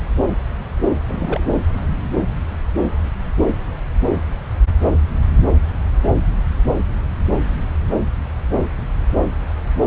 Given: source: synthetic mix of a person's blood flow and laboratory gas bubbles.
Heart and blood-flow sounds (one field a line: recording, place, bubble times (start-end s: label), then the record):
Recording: Doppler ultrasound of blood flow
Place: subclavian vein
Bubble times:
1.08-1.55 s: bubbles
From the record:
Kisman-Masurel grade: 212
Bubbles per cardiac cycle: several, 3 to 8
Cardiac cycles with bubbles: 1 to 10%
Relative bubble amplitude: moderate (0.250 to 0.450)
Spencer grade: 1 (occasional bubble signal discernible with the cardiac motion signal, with majority of cardiac periods free of bubbles)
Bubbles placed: anywhere in the cardiac cycle